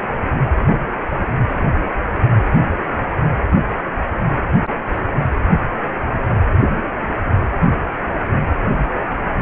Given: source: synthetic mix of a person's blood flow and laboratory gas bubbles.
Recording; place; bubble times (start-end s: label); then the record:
Doppler ultrasound of blood flow; precordium
4.93-5.01 s: bubbles
From the record:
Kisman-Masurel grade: 111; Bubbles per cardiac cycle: 1 to 2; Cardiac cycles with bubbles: 1 to 10%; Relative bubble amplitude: barely perceptible (0.100 to 0.250); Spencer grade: 1 (occasional bubble signal discernible with the cardiac motion signal, with majority of cardiac periods free of bubbles); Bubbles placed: anywhere in the cardiac cycle